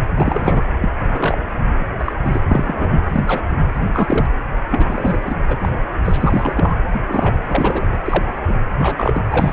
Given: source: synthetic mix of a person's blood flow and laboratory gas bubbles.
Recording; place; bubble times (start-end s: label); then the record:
Doppler ultrasound of blood flow; precordium
0.00-0.02 s: bubbles
0.17-0.64 s: bubbles
0.81-0.89 s: bubbles
1.07-1.38 s: bubbles
1.79-1.85 s: bubbles
1.99-2.12 s: bubbles
2.25-2.40 s: bubbles
2.48-3.04 s: bubbles
3.13-3.24 s: bubbles
3.27-3.43 s: bubbles
3.76-3.86 s: bubbles
3.94-4.26 s: bubbles
4.70-5.36 s: bubbles
5.49-5.84 s: bubbles
6.04-6.75 s: bubbles
6.94-7.00 s: bubbles
7.08-7.37 s: bubbles
7.49-7.84 s: bubbles
7.91-7.98 s: bubbles
8.06-8.38 s: bubbles
8.47-8.55 s: bubbles
8.79-9.24 s: bubbles
9.30-9.52 s: bubbles
From the record:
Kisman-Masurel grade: 242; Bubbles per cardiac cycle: several, 3 to 8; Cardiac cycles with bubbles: 100%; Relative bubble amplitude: moderate (0.250 to 0.450); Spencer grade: 3 (all of the cardiac periods contain showers or single bubble signals, but not dominating or overriding the cardiac motion signals); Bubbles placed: anywhere in the cardiac cycle